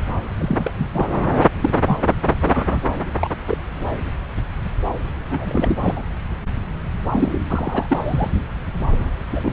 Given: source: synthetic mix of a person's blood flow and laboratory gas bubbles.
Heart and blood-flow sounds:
Doppler ultrasound of blood flow; subclavian vein
0.35-0.89 s: bubbles
0.94-1.11 s: bubbles
1.61-1.70 s: bubbles
1.87-1.98 s: bubbles
2.40-2.79 s: bubbles
3.15-3.29 s: bubbles
3.47-3.57 s: bubbles
5.29-5.76 s: bubbles
5.82-6.03 s: bubbles
7.12-7.39 s: bubbles
7.47-8.30 s: bubbles
9.36-9.53 s: bubbles
From the record:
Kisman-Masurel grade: 232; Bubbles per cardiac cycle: several, 3 to 8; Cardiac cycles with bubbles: 50 to 99%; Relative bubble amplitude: moderate (0.250 to 0.450); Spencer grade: 3 (all of the cardiac periods contain showers or single bubble signals, but not dominating or overriding the cardiac motion signals); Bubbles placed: anywhere in the cardiac cycle

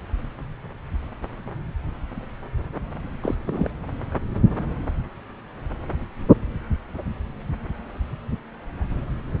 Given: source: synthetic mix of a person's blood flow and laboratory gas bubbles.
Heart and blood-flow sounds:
Doppler ultrasound of blood flow; subclavian vein
3.23-3.35 s: bubbles
3.46-3.71 s: bubbles
From the record:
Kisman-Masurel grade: 212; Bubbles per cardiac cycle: several, 3 to 8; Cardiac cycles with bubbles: 1 to 10%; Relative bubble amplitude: moderate (0.250 to 0.450); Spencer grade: 1 (occasional bubble signal discernible with the cardiac motion signal, with majority of cardiac periods free of bubbles); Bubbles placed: anywhere in the cardiac cycle

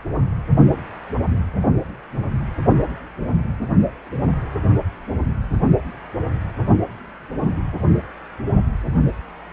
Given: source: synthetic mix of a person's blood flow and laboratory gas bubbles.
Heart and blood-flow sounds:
Doppler ultrasound of blood flow; precordium
no bubbles
From the record:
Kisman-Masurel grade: 000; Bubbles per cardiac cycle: 0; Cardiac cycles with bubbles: 0%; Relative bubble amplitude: no bubbles discernible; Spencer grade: 0 (complete lack of bubble signals)

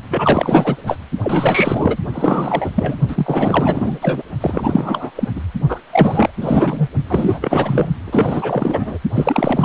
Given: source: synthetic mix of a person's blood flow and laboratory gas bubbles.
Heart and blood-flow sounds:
Doppler ultrasound of blood flow; precordium
0.09-0.77 s: bubbles
0.86-0.97 s: bubbles
1.22-1.97 s: bubbles
2.13-2.71 s: bubbles
2.75-2.96 s: bubbles
3.08-3.99 s: bubbles
4.01-4.22 s: bubbles
4.41-5.11 s: bubbles
5.15-5.29 s: bubbles
5.34-5.41 s: bubbles
5.68-5.80 s: bubbles
5.92-6.32 s: bubbles
6.36-6.88 s: bubbles
7.09-7.89 s: bubbles
8.06-8.98 s: bubbles
9.15-9.65 s: bubbles
From the record:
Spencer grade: 4 (maximum detectable bubble signal sounding continuously throughout systole and diastole of every cardiac period, and overriding the amplitude of the normal cardiac signals); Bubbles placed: only in the low amplitude regions of the cardiac cycle

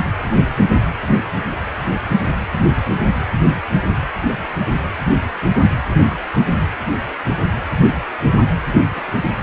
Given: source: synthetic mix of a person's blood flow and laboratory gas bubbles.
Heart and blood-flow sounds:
Doppler ultrasound of blood flow; precordium
8.94-9.27 s: bubbles
From the record:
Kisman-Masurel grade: 121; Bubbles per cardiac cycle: 1 to 2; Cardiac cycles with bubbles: 10 to 50%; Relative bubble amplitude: barely perceptible (0.100 to 0.250); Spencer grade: 2 (many but less than half of the cardiac periods contain bubble signals, singularly or in groups); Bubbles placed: anywhere in the cardiac cycle

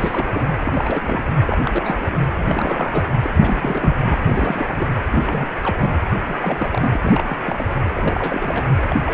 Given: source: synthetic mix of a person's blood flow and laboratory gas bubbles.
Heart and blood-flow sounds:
Doppler ultrasound of blood flow; precordium
0.00-0.27 s: bubbles
0.31-0.54 s: bubbles
0.65-1.33 s: bubbles
1.46-2.20 s: bubbles
2.38-3.11 s: bubbles
3.23-4.18 s: bubbles
4.21-4.88 s: bubbles
5.10-5.47 s: bubbles
5.61-5.76 s: bubbles
5.78-5.98 s: bubbles
6.28-6.34 s: bubbles
6.42-6.96 s: bubbles
7.01-7.38 s: bubbles
7.46-7.65 s: bubbles
7.93-8.76 s: bubbles
8.89-8.96 s: bubbles
9.05-9.14 s: bubbles
From the record:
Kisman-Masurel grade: 342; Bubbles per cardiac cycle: rolling drumbeat, 9 or more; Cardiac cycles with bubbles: 100%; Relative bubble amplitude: moderate (0.250 to 0.450); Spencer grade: 3 (all of the cardiac periods contain showers or single bubble signals, but not dominating or overriding the cardiac motion signals); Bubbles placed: anywhere in the cardiac cycle

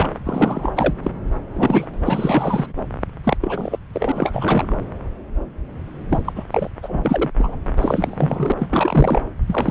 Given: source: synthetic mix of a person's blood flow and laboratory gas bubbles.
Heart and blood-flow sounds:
Doppler ultrasound of blood flow; subclavian vein
0.00-0.09 s: bubbles
0.24-0.72 s: bubbles
0.76-0.92 s: bubbles
1.02-1.11 s: bubbles
1.54-1.87 s: bubbles
1.93-1.97 s: bubbles
2.06-2.66 s: bubbles
3.24-3.37 s: bubbles
3.41-3.77 s: bubbles
3.94-4.12 s: bubbles
4.14-4.78 s: bubbles
6.09-6.22 s: bubbles
6.25-6.32 s: bubbles
6.35-6.44 s: bubbles
6.51-6.69 s: bubbles
6.82-7.30 s: bubbles
7.38-7.55 s: bubbles
7.77-8.52 s: bubbles
8.59-8.67 s: bubbles
8.70-9.21 s: bubbles
9.46-9.71 s: bubbles
From the record:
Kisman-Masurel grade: 333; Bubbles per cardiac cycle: rolling drumbeat, 9 or more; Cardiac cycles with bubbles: 50 to 99%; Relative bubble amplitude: loud (0.450 to 0.775); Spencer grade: 3 (all of the cardiac periods contain showers or single bubble signals, but not dominating or overriding the cardiac motion signals); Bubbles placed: anywhere in the cardiac cycle

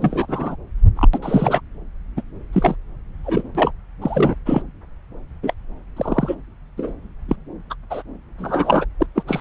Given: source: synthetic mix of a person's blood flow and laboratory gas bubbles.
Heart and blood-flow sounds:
Doppler ultrasound of blood flow; subclavian vein
0.00-0.55 s: bubbles
0.96-1.08 s: bubbles
1.13-1.18 s: bubbles
1.22-1.60 s: bubbles
2.17-2.21 s: bubbles
2.52-2.75 s: bubbles
3.24-3.49 s: bubbles
3.55-3.72 s: bubbles
4.01-4.35 s: bubbles
4.46-4.62 s: bubbles
5.42-5.54 s: bubbles
5.96-6.35 s: bubbles
6.77-6.93 s: bubbles
7.29-7.36 s: bubbles
7.70-7.74 s: bubbles
7.90-8.03 s: bubbles
8.38-8.85 s: bubbles
9.00-9.06 s: bubbles
9.15-9.22 s: bubbles
9.27-9.40 s: bubbles
From the record:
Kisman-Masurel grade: 233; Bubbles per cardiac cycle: several, 3 to 8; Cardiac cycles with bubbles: 50 to 99%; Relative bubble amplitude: loud (0.450 to 0.775); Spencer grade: 3 (all of the cardiac periods contain showers or single bubble signals, but not dominating or overriding the cardiac motion signals); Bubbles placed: anywhere in the cardiac cycle

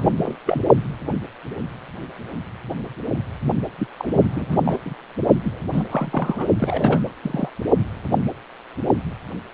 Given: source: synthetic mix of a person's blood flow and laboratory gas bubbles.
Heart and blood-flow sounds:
Doppler ultrasound of blood flow; precordium
0.00-0.12 s: bubbles
0.23-0.37 s: bubbles
0.46-0.62 s: bubbles
3.78-3.88 s: bubbles
3.97-4.58 s: bubbles
4.64-4.78 s: bubbles
4.85-4.95 s: bubbles
5.43-5.59 s: bubbles
5.72-5.83 s: bubbles
5.89-6.46 s: bubbles
6.58-7.11 s: bubbles
7.21-7.50 s: bubbles
From the record:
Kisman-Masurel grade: 332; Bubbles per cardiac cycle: rolling drumbeat, 9 or more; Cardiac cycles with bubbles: 50 to 99%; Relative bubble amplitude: moderate (0.250 to 0.450); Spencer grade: 3 (all of the cardiac periods contain showers or single bubble signals, but not dominating or overriding the cardiac motion signals); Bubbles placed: only in the low amplitude regions of the cardiac cycle

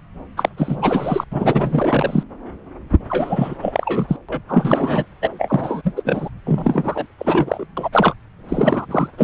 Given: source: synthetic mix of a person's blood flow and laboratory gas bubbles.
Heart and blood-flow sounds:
Doppler ultrasound of blood flow; subclavian vein
0.37-0.49 s: bubbles
0.57-1.24 s: bubbles
1.31-2.23 s: bubbles
3.09-3.55 s: bubbles
3.62-4.17 s: bubbles
4.29-4.42 s: bubbles
4.49-5.04 s: bubbles
5.21-5.30 s: bubbles
5.38-5.82 s: bubbles
5.84-6.29 s: bubbles
6.45-7.07 s: bubbles
7.18-7.65 s: bubbles
7.76-7.89 s: bubbles
7.92-8.14 s: bubbles
8.49-8.86 s: bubbles
8.91-9.08 s: bubbles
9.18-9.24 s: bubbles
From the record:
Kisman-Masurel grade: 343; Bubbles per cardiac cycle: rolling drumbeat, 9 or more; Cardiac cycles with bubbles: 100%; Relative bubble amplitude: loud (0.450 to 0.775); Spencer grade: 3 (all of the cardiac periods contain showers or single bubble signals, but not dominating or overriding the cardiac motion signals); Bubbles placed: anywhere in the cardiac cycle

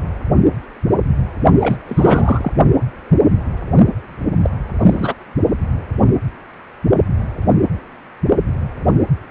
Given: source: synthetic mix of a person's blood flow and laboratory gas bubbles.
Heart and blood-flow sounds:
Doppler ultrasound of blood flow; precordium
1.59-1.76 s: bubbles
1.86-2.51 s: bubbles
4.43-4.50 s: bubbles
4.79-5.14 s: bubbles
From the record:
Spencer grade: 2 (many but less than half of the cardiac periods contain bubble signals, singularly or in groups); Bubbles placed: only in the low amplitude regions of the cardiac cycle

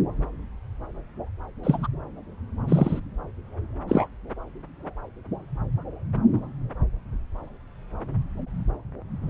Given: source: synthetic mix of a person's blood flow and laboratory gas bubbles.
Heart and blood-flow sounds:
Doppler ultrasound of blood flow; subclavian vein
1.63-1.87 s: bubbles
2.67-3.00 s: bubbles
3.88-4.07 s: bubbles
From the record:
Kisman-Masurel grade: 123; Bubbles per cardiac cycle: 1 to 2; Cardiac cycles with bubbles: 10 to 50%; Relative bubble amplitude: loud (0.450 to 0.775); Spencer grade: 2 (many but less than half of the cardiac periods contain bubble signals, singularly or in groups); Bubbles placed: anywhere in the cardiac cycle

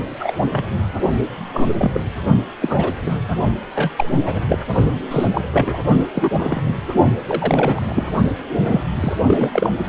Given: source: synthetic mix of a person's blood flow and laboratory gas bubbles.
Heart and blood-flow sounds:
Doppler ultrasound of blood flow; precordium
0.20-0.34 s: bubbles
0.51-0.65 s: bubbles
1.52-2.01 s: bubbles
2.61-2.93 s: bubbles
3.06-3.19 s: bubbles
3.75-3.91 s: bubbles
3.98-4.08 s: bubbles
4.25-4.41 s: bubbles
4.48-4.58 s: bubbles
5.10-5.27 s: bubbles
5.34-5.41 s: bubbles
5.52-5.79 s: bubbles
6.00-6.05 s: bubbles
6.14-6.74 s: bubbles
7.27-8.07 s: bubbles
8.71-8.80 s: bubbles
8.95-9.13 s: bubbles
9.27-9.70 s: bubbles
9.86-9.89 s: bubbles
From the record:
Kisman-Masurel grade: 243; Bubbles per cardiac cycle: several, 3 to 8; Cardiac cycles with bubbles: 100%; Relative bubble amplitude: loud (0.450 to 0.775); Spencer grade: 3 (all of the cardiac periods contain showers or single bubble signals, but not dominating or overriding the cardiac motion signals); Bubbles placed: only in the low amplitude regions of the cardiac cycle

